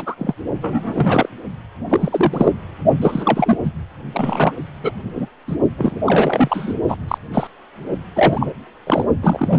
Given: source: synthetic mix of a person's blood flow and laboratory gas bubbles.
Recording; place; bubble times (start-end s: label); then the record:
Doppler ultrasound of blood flow; precordium
0.00-0.15 s: bubbles
0.17-0.34 s: bubbles
0.61-1.29 s: bubbles
1.90-2.52 s: bubbles
3.02-3.58 s: bubbles
3.63-3.72 s: bubbles
4.12-4.52 s: bubbles
4.83-4.92 s: bubbles
5.15-5.26 s: bubbles
5.48-5.57 s: bubbles
5.77-6.01 s: bubbles
6.06-6.74 s: bubbles
6.88-6.96 s: bubbles
7.08-7.18 s: bubbles
7.32-7.47 s: bubbles
8.15-8.47 s: bubbles
8.86-9.05 s: bubbles
9.22-9.59 s: bubbles
From the record:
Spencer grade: 3 (all of the cardiac periods contain showers or single bubble signals, but not dominating or overriding the cardiac motion signals); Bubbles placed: only in the low amplitude regions of the cardiac cycle